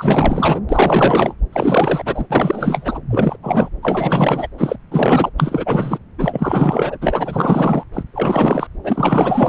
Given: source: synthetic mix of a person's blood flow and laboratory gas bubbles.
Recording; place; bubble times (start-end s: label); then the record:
Doppler ultrasound of blood flow; subclavian vein
0.00-0.60 s: bubbles
0.69-1.34 s: bubbles
1.52-2.27 s: bubbles
2.29-3.00 s: bubbles
3.10-3.37 s: bubbles
3.43-3.69 s: bubbles
3.82-4.48 s: bubbles
4.58-4.76 s: bubbles
4.91-5.30 s: bubbles
5.37-5.98 s: bubbles
6.18-6.98 s: bubbles
7.01-7.83 s: bubbles
7.93-8.03 s: bubbles
8.13-8.67 s: bubbles
8.84-9.49 s: bubbles
From the record:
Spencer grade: 4 (maximum detectable bubble signal sounding continuously throughout systole and diastole of every cardiac period, and overriding the amplitude of the normal cardiac signals); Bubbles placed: anywhere in the cardiac cycle